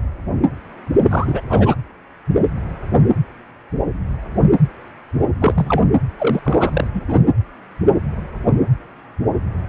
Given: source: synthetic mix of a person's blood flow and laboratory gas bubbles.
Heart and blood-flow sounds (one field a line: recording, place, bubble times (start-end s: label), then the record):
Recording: Doppler ultrasound of blood flow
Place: precordium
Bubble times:
1.10-1.41 s: bubbles
1.49-1.75 s: bubbles
5.40-5.85 s: bubbles
6.18-6.87 s: bubbles
6.93-7.02 s: bubbles
7.08-7.20 s: bubbles
From the record:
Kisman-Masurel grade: 222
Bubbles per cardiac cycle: several, 3 to 8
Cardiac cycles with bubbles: 10 to 50%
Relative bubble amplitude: moderate (0.250 to 0.450)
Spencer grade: 2 (many but less than half of the cardiac periods contain bubble signals, singularly or in groups)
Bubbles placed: anywhere in the cardiac cycle